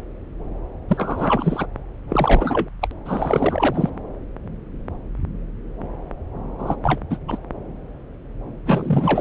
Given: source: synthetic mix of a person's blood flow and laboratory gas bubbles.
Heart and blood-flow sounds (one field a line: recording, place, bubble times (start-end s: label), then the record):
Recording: Doppler ultrasound of blood flow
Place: subclavian vein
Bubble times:
0.88-1.66 s: bubbles
2.09-2.69 s: bubbles
2.81-2.88 s: bubbles
3.05-3.89 s: bubbles
6.58-6.76 s: bubbles
6.83-7.01 s: bubbles
7.10-7.17 s: bubbles
7.28-7.39 s: bubbles
8.66-9.21 s: bubbles
From the record:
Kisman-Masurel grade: 333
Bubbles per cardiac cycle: rolling drumbeat, 9 or more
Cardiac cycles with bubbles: 50 to 99%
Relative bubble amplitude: loud (0.450 to 0.775)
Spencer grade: 3 (all of the cardiac periods contain showers or single bubble signals, but not dominating or overriding the cardiac motion signals)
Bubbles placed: anywhere in the cardiac cycle